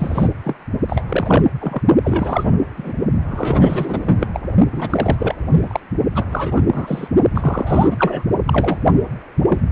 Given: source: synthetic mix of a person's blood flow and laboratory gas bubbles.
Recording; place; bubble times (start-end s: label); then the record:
Doppler ultrasound of blood flow; precordium
0.00-0.29 s: bubbles
0.44-0.58 s: bubbles
0.89-1.03 s: bubbles
1.06-1.43 s: bubbles
1.60-1.80 s: bubbles
2.03-2.59 s: bubbles
2.77-2.92 s: bubbles
3.30-4.27 s: bubbles
4.33-4.40 s: bubbles
4.71-5.15 s: bubbles
5.18-5.35 s: bubbles
5.53-5.80 s: bubbles
6.15-6.25 s: bubbles
6.31-6.64 s: bubbles
6.67-7.08 s: bubbles
7.34-8.24 s: bubbles
8.45-8.79 s: bubbles
9.49-9.63 s: bubbles
From the record:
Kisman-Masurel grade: 343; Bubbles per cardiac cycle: rolling drumbeat, 9 or more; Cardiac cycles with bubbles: 100%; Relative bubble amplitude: loud (0.450 to 0.775); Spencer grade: 3 (all of the cardiac periods contain showers or single bubble signals, but not dominating or overriding the cardiac motion signals); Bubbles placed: only in the low amplitude regions of the cardiac cycle